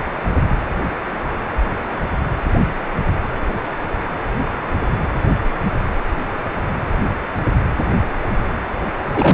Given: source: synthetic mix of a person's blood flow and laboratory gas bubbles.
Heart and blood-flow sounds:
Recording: Doppler ultrasound of blood flow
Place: precordium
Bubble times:
9.13-9.34 s: bubbles
From the record:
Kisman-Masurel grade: 223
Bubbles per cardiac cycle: several, 3 to 8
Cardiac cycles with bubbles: 10 to 50%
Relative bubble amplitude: loud (0.450 to 0.775)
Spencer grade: 2 (many but less than half of the cardiac periods contain bubble signals, singularly or in groups)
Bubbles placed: anywhere in the cardiac cycle

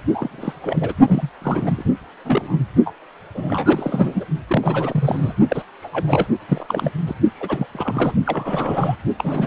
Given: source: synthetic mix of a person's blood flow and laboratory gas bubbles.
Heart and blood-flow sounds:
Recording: Doppler ultrasound of blood flow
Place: precordium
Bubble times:
0.14-0.53 s: bubbles
0.62-0.94 s: bubbles
1.08-1.29 s: bubbles
1.42-1.83 s: bubbles
2.25-2.64 s: bubbles
2.85-2.93 s: bubbles
3.35-4.25 s: bubbles
4.48-5.33 s: bubbles
5.49-5.63 s: bubbles
5.82-6.26 s: bubbles
6.48-6.91 s: bubbles
7.07-7.15 s: bubbles
7.36-7.67 s: bubbles
7.73-8.14 s: bubbles
8.26-8.96 s: bubbles
9.18-9.47 s: bubbles
From the record:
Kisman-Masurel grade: 342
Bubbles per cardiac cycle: rolling drumbeat, 9 or more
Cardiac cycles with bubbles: 100%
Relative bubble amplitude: moderate (0.250 to 0.450)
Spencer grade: 3 (all of the cardiac periods contain showers or single bubble signals, but not dominating or overriding the cardiac motion signals)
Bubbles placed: only in the low amplitude regions of the cardiac cycle

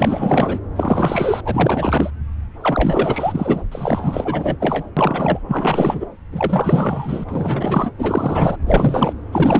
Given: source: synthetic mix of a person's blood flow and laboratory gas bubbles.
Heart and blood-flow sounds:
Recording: Doppler ultrasound of blood flow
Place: subclavian vein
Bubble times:
0.00-0.59 s: bubbles
0.75-1.41 s: bubbles
1.44-2.10 s: bubbles
2.60-3.62 s: bubbles
3.71-4.56 s: bubbles
4.60-4.84 s: bubbles
4.96-5.39 s: bubbles
5.48-6.07 s: bubbles
6.32-7.25 s: bubbles
7.28-7.90 s: bubbles
7.97-8.56 s: bubbles
8.66-9.13 s: bubbles
9.32-9.60 s: bubbles
From the record:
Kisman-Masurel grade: 444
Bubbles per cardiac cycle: continuous sound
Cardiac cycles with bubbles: 100%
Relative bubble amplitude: maximal (0.775 to 0.999)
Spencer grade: 4 (maximum detectable bubble signal sounding continuously throughout systole and diastole of every cardiac period, and overriding the amplitude of the normal cardiac signals)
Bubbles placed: anywhere in the cardiac cycle

